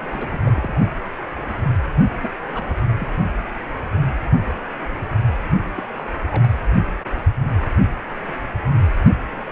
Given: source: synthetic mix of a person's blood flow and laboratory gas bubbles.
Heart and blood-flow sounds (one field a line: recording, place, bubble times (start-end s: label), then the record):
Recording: Doppler ultrasound of blood flow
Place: precordium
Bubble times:
0.00-0.75 s: bubbles
2.22-2.28 s: bubbles
2.52-2.71 s: bubbles
2.99-3.09 s: bubbles
5.76-5.83 s: bubbles
5.99-6.06 s: bubbles
6.28-6.48 s: bubbles
From the record:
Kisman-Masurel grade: 221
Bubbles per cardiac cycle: several, 3 to 8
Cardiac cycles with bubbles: 10 to 50%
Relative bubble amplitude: barely perceptible (0.100 to 0.250)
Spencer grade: 2 (many but less than half of the cardiac periods contain bubble signals, singularly or in groups)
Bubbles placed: only in the low amplitude regions of the cardiac cycle